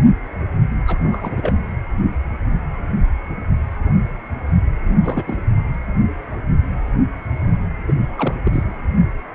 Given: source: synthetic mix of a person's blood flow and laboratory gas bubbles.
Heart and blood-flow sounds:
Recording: Doppler ultrasound of blood flow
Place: precordium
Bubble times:
0.87-1.57 s: bubbles
5.02-5.24 s: bubbles
5.27-5.39 s: bubbles
7.87-7.92 s: bubbles
8.16-8.35 s: bubbles
8.45-8.63 s: bubbles
From the record:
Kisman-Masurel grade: 222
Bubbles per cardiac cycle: several, 3 to 8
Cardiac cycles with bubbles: 10 to 50%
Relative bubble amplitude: moderate (0.250 to 0.450)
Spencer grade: 2 (many but less than half of the cardiac periods contain bubble signals, singularly or in groups)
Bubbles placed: anywhere in the cardiac cycle

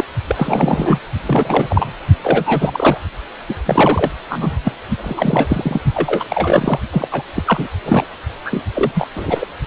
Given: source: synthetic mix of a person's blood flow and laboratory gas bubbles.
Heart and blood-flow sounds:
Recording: Doppler ultrasound of blood flow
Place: precordium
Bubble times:
0.00-0.04 s: bubbles
0.27-0.99 s: bubbles
1.26-1.95 s: bubbles
2.23-2.98 s: bubbles
3.48-3.54 s: bubbles
3.65-4.11 s: bubbles
4.29-4.57 s: bubbles
4.64-4.72 s: bubbles
4.97-5.81 s: bubbles
5.93-6.24 s: bubbles
6.29-6.79 s: bubbles
6.91-7.07 s: bubbles
7.11-7.22 s: bubbles
7.34-7.67 s: bubbles
7.85-8.04 s: bubbles
8.45-8.63 s: bubbles
8.74-8.92 s: bubbles
8.94-9.07 s: bubbles
9.16-9.47 s: bubbles
9.65-9.67 s: bubbles
From the record:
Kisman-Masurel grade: 343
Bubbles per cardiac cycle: rolling drumbeat, 9 or more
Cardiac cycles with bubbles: 100%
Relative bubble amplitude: loud (0.450 to 0.775)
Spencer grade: 3 (all of the cardiac periods contain showers or single bubble signals, but not dominating or overriding the cardiac motion signals)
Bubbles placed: only in the low amplitude regions of the cardiac cycle

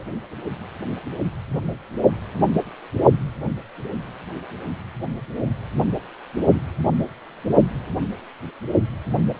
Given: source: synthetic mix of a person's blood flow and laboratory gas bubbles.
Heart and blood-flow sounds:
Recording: Doppler ultrasound of blood flow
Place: precordium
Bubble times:
0.00-0.03 s: bubbles
From the record:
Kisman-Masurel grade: 212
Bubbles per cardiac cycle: several, 3 to 8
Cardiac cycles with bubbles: 1 to 10%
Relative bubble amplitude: moderate (0.250 to 0.450)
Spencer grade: 1 (occasional bubble signal discernible with the cardiac motion signal, with majority of cardiac periods free of bubbles)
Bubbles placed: only in the low amplitude regions of the cardiac cycle

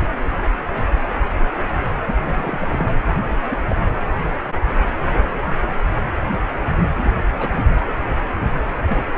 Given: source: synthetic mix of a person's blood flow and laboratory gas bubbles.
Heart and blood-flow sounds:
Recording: Doppler ultrasound of blood flow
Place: precordium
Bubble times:
0.00-0.06 s: bubbles
2.06-2.15 s: bubbles
2.23-2.92 s: bubbles
3.25-3.34 s: bubbles
3.50-3.57 s: bubbles
3.69-3.75 s: bubbles
6.98-7.16 s: bubbles
7.39-7.58 s: bubbles
8.88-9.03 s: bubbles
From the record:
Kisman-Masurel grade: 221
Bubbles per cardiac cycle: several, 3 to 8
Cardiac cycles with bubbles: 10 to 50%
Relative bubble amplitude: barely perceptible (0.100 to 0.250)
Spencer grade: 2 (many but less than half of the cardiac periods contain bubble signals, singularly or in groups)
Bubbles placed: anywhere in the cardiac cycle

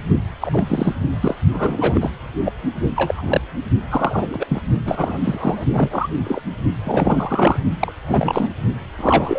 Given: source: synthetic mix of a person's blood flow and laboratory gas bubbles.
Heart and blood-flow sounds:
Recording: Doppler ultrasound of blood flow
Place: precordium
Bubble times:
0.41-0.95 s: bubbles
1.21-1.35 s: bubbles
1.52-2.10 s: bubbles
2.45-2.52 s: bubbles
2.83-2.90 s: bubbles
2.96-3.41 s: bubbles
3.89-4.61 s: bubbles
4.85-5.18 s: bubbles
5.23-5.65 s: bubbles
5.72-6.07 s: bubbles
6.23-6.40 s: bubbles
6.83-7.61 s: bubbles
7.79-7.92 s: bubbles
8.05-8.49 s: bubbles
8.97-9.39 s: bubbles
From the record:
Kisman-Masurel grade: 242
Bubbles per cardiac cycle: several, 3 to 8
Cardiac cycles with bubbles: 100%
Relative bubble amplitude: moderate (0.250 to 0.450)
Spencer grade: 3 (all of the cardiac periods contain showers or single bubble signals, but not dominating or overriding the cardiac motion signals)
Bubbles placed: only in the low amplitude regions of the cardiac cycle

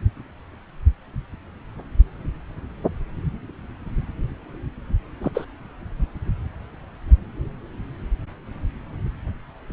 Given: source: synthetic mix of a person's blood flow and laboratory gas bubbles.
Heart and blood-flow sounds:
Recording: Doppler ultrasound of blood flow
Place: subclavian vein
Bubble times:
5.22-5.31 s: bubbles
5.34-5.45 s: bubbles
From the record:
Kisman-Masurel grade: 112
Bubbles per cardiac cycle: 1 to 2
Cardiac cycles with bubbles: 1 to 10%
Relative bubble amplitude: moderate (0.250 to 0.450)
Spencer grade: 1 (occasional bubble signal discernible with the cardiac motion signal, with majority of cardiac periods free of bubbles)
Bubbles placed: anywhere in the cardiac cycle

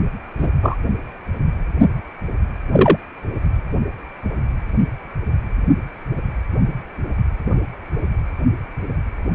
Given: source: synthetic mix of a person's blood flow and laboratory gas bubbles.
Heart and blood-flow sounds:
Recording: Doppler ultrasound of blood flow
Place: precordium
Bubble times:
0.39-0.48 s: bubbles
0.62-0.76 s: bubbles
2.72-2.97 s: bubbles
From the record:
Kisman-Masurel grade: 123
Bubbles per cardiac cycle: 1 to 2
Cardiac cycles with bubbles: 10 to 50%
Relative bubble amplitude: loud (0.450 to 0.775)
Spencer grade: 2 (many but less than half of the cardiac periods contain bubble signals, singularly or in groups)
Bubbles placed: anywhere in the cardiac cycle

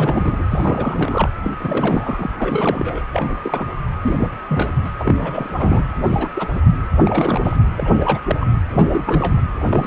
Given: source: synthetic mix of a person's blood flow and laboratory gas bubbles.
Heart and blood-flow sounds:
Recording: Doppler ultrasound of blood flow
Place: precordium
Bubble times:
0.00-1.29 s: bubbles
1.43-1.52 s: bubbles
1.59-2.30 s: bubbles
2.38-3.02 s: bubbles
3.12-3.40 s: bubbles
3.43-3.67 s: bubbles
4.01-4.31 s: bubbles
4.49-4.72 s: bubbles
4.84-4.91 s: bubbles
4.99-5.88 s: bubbles
6.03-6.28 s: bubbles
6.35-6.49 s: bubbles
6.55-6.60 s: bubbles
7.05-7.57 s: bubbles
7.77-8.21 s: bubbles
8.27-8.36 s: bubbles
8.40-8.46 s: bubbles
8.71-9.35 s: bubbles
9.58-9.87 s: bubbles
From the record:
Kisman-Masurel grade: 342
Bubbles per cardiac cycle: rolling drumbeat, 9 or more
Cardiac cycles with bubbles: 100%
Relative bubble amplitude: moderate (0.250 to 0.450)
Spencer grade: 3 (all of the cardiac periods contain showers or single bubble signals, but not dominating or overriding the cardiac motion signals)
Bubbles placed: anywhere in the cardiac cycle

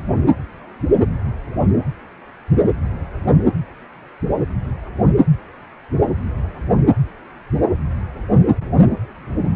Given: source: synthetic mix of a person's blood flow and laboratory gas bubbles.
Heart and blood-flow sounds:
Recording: Doppler ultrasound of blood flow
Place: precordium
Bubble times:
no bubbles
From the record:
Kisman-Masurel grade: 000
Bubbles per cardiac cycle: 0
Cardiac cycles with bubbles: 0%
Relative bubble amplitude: no bubbles discernible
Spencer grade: 0 (complete lack of bubble signals)

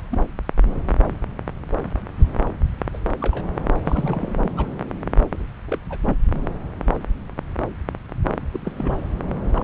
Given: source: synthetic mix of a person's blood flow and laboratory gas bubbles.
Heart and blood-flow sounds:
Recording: Doppler ultrasound of blood flow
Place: subclavian vein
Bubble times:
0.11-0.17 s: bubbles
2.93-2.98 s: bubbles
3.20-3.46 s: bubbles
3.55-3.60 s: bubbles
3.84-4.52 s: bubbles
4.56-4.67 s: bubbles
5.31-5.47 s: bubbles
5.66-5.79 s: bubbles
5.89-5.98 s: bubbles
6.05-6.17 s: bubbles
8.52-8.60 s: bubbles
8.65-9.08 s: bubbles
9.55-9.64 s: bubbles
From the record:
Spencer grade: 2 (many but less than half of the cardiac periods contain bubble signals, singularly or in groups)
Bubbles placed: anywhere in the cardiac cycle

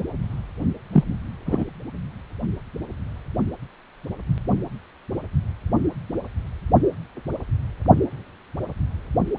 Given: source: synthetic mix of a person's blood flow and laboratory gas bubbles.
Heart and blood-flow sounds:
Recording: Doppler ultrasound of blood flow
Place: precordium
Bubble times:
0.92-1.04 s: bubbles
1.46-1.65 s: bubbles
From the record:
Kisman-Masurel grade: 123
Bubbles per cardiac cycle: 1 to 2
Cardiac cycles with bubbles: 10 to 50%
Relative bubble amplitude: loud (0.450 to 0.775)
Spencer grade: 2 (many but less than half of the cardiac periods contain bubble signals, singularly or in groups)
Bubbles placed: only in the low amplitude regions of the cardiac cycle

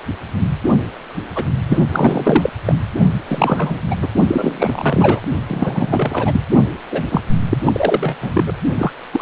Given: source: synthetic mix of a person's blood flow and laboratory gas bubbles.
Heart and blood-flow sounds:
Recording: Doppler ultrasound of blood flow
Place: precordium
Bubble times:
1.35-1.45 s: bubbles
1.69-1.81 s: bubbles
1.92-2.50 s: bubbles
2.65-2.75 s: bubbles
3.27-3.79 s: bubbles
3.91-3.96 s: bubbles
4.01-4.07 s: bubbles
4.27-5.21 s: bubbles
5.47-6.40 s: bubbles
6.91-7.04 s: bubbles
7.09-7.21 s: bubbles
7.50-7.57 s: bubbles
7.65-8.17 s: bubbles
8.21-8.44 s: bubbles
8.46-8.53 s: bubbles
8.74-8.93 s: bubbles
9.12-9.22 s: bubbles
From the record:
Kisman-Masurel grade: 333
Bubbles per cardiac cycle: rolling drumbeat, 9 or more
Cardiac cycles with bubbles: 50 to 99%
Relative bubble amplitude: loud (0.450 to 0.775)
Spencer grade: 3 (all of the cardiac periods contain showers or single bubble signals, but not dominating or overriding the cardiac motion signals)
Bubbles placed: only in the low amplitude regions of the cardiac cycle

